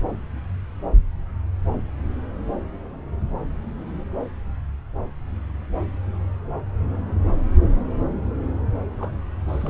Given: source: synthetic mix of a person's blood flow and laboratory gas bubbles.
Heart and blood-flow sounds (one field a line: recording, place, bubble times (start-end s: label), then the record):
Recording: Doppler ultrasound of blood flow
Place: subclavian vein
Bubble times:
8.98-9.11 s: bubbles
9.48-9.70 s: bubbles
From the record:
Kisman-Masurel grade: 221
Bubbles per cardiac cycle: several, 3 to 8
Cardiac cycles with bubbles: 10 to 50%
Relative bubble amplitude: barely perceptible (0.100 to 0.250)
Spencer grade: 2 (many but less than half of the cardiac periods contain bubble signals, singularly or in groups)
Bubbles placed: anywhere in the cardiac cycle